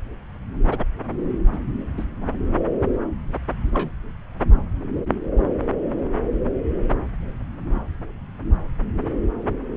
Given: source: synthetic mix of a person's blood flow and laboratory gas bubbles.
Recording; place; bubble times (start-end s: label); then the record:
Doppler ultrasound of blood flow; subclavian vein
0.70-0.83 s: bubbles
1.53-1.58 s: bubbles
1.97-2.04 s: bubbles
3.72-3.89 s: bubbles
From the record:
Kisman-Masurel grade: 122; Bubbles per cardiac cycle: 1 to 2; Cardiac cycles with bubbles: 10 to 50%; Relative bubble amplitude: moderate (0.250 to 0.450); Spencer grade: 2 (many but less than half of the cardiac periods contain bubble signals, singularly or in groups); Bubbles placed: anywhere in the cardiac cycle